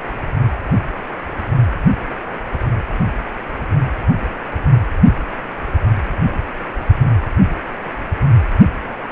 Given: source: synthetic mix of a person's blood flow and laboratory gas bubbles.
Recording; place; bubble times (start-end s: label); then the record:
Doppler ultrasound of blood flow; precordium
no bubbles
From the record:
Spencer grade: 0 (complete lack of bubble signals)